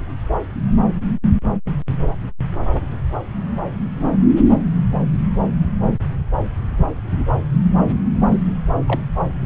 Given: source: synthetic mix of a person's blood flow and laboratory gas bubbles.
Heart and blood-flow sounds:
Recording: Doppler ultrasound of blood flow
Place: subclavian vein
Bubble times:
8.86-9.01 s: bubbles
From the record:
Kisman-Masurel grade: 112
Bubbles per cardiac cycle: 1 to 2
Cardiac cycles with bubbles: 1 to 10%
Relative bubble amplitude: moderate (0.250 to 0.450)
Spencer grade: 1 (occasional bubble signal discernible with the cardiac motion signal, with majority of cardiac periods free of bubbles)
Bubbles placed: anywhere in the cardiac cycle

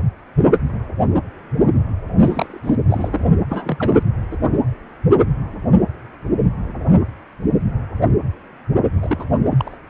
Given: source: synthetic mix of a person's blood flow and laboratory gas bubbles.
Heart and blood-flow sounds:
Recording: Doppler ultrasound of blood flow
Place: precordium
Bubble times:
2.19-2.60 s: bubbles
2.64-2.76 s: bubbles
2.90-3.29 s: bubbles
3.50-4.03 s: bubbles
4.31-4.37 s: bubbles
9.00-9.16 s: bubbles
9.19-9.24 s: bubbles
9.50-9.78 s: bubbles
From the record:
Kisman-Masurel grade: 222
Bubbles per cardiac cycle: several, 3 to 8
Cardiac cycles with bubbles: 10 to 50%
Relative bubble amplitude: moderate (0.250 to 0.450)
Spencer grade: 2 (many but less than half of the cardiac periods contain bubble signals, singularly or in groups)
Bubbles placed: only in the low amplitude regions of the cardiac cycle

